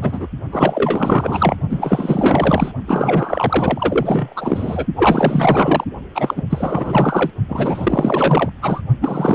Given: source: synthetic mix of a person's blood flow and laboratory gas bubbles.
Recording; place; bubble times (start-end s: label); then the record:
Doppler ultrasound of blood flow; precordium
0.02-0.28 s: bubbles
0.52-1.56 s: bubbles
1.69-2.72 s: bubbles
2.88-4.87 s: bubbles
4.96-5.84 s: bubbles
6.15-6.43 s: bubbles
6.50-7.31 s: bubbles
7.48-8.50 s: bubbles
8.62-8.81 s: bubbles
9.01-9.35 s: bubbles
From the record:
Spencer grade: 4 (maximum detectable bubble signal sounding continuously throughout systole and diastole of every cardiac period, and overriding the amplitude of the normal cardiac signals); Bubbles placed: only in the low amplitude regions of the cardiac cycle